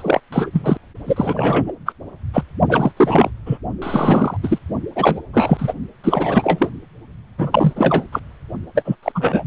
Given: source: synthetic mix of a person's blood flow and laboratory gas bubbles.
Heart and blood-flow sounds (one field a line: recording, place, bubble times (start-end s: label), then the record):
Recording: Doppler ultrasound of blood flow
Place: precordium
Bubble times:
0.00-0.20 s: bubbles
0.32-0.77 s: bubbles
1.06-1.72 s: bubbles
1.85-1.93 s: bubbles
2.33-2.43 s: bubbles
2.69-2.92 s: bubbles
2.97-3.31 s: bubbles
3.46-3.58 s: bubbles
3.82-4.37 s: bubbles
4.43-4.58 s: bubbles
4.95-5.21 s: bubbles
5.33-5.74 s: bubbles
6.04-6.69 s: bubbles
7.38-7.73 s: bubbles
7.76-8.05 s: bubbles
8.12-8.20 s: bubbles
8.75-8.96 s: bubbles
9.03-9.12 s: bubbles
9.15-9.44 s: bubbles
From the record:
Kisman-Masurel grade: 333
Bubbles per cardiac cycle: rolling drumbeat, 9 or more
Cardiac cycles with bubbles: 50 to 99%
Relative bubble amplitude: loud (0.450 to 0.775)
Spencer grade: 3 (all of the cardiac periods contain showers or single bubble signals, but not dominating or overriding the cardiac motion signals)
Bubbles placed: only in the low amplitude regions of the cardiac cycle